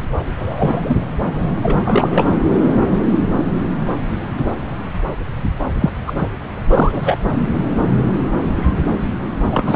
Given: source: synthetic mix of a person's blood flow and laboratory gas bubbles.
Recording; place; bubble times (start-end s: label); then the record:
Doppler ultrasound of blood flow; subclavian vein
0.37-0.95 s: bubbles
1.62-1.81 s: bubbles
1.84-2.30 s: bubbles
5.80-5.90 s: bubbles
6.06-6.27 s: bubbles
6.67-7.18 s: bubbles
9.51-9.76 s: bubbles
From the record:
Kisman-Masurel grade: 223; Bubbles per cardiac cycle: several, 3 to 8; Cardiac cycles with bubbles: 10 to 50%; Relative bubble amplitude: loud (0.450 to 0.775); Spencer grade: 2 (many but less than half of the cardiac periods contain bubble signals, singularly or in groups); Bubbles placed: anywhere in the cardiac cycle